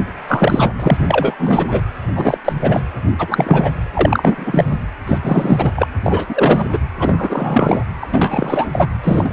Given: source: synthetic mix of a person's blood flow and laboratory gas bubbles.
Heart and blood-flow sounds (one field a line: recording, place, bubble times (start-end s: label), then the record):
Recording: Doppler ultrasound of blood flow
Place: precordium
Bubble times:
0.28-0.98 s: bubbles
1.06-1.35 s: bubbles
1.39-1.82 s: bubbles
2.15-2.38 s: bubbles
2.44-2.53 s: bubbles
2.62-2.82 s: bubbles
3.18-3.73 s: bubbles
3.94-4.64 s: bubbles
4.69-4.76 s: bubbles
5.06-5.18 s: bubbles
5.22-5.72 s: bubbles
5.75-5.88 s: bubbles
6.02-6.25 s: bubbles
6.28-6.68 s: bubbles
6.71-6.78 s: bubbles
6.99-7.83 s: bubbles
8.02-8.07 s: bubbles
8.12-8.67 s: bubbles
8.72-8.88 s: bubbles
9.04-9.33 s: bubbles
From the record:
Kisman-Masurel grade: 343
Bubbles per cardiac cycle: rolling drumbeat, 9 or more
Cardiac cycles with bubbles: 100%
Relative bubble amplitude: loud (0.450 to 0.775)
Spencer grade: 3 (all of the cardiac periods contain showers or single bubble signals, but not dominating or overriding the cardiac motion signals)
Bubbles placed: anywhere in the cardiac cycle